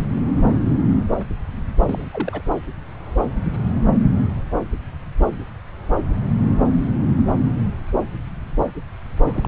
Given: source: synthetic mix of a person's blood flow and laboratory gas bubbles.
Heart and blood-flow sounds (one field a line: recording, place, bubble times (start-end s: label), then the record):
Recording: Doppler ultrasound of blood flow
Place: subclavian vein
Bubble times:
1.86-2.08 s: bubbles
2.11-2.42 s: bubbles
9.26-9.48 s: bubbles
From the record:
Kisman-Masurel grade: 211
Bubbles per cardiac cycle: several, 3 to 8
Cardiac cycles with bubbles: 1 to 10%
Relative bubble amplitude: barely perceptible (0.100 to 0.250)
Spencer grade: 1 (occasional bubble signal discernible with the cardiac motion signal, with majority of cardiac periods free of bubbles)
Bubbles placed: anywhere in the cardiac cycle